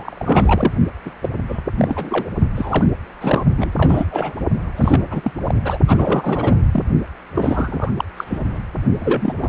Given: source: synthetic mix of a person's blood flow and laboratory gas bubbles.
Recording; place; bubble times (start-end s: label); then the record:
Doppler ultrasound of blood flow; precordium
0.00-0.73 s: bubbles
1.05-1.11 s: bubbles
1.22-1.29 s: bubbles
1.48-1.60 s: bubbles
1.79-2.29 s: bubbles
2.55-2.87 s: bubbles
3.21-3.44 s: bubbles
3.57-3.72 s: bubbles
3.77-4.06 s: bubbles
4.11-4.34 s: bubbles
4.76-5.21 s: bubbles
5.23-5.32 s: bubbles
5.46-5.54 s: bubbles
5.61-5.78 s: bubbles
5.87-6.65 s: bubbles
6.71-6.83 s: bubbles
7.35-7.91 s: bubbles
7.96-8.04 s: bubbles
8.16-8.58 s: bubbles
8.99-9.34 s: bubbles
9.38-9.49 s: bubbles
From the record:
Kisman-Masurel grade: 342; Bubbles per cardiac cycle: rolling drumbeat, 9 or more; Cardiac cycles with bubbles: 100%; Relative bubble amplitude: moderate (0.250 to 0.450); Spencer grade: 3 (all of the cardiac periods contain showers or single bubble signals, but not dominating or overriding the cardiac motion signals); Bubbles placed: only in the low amplitude regions of the cardiac cycle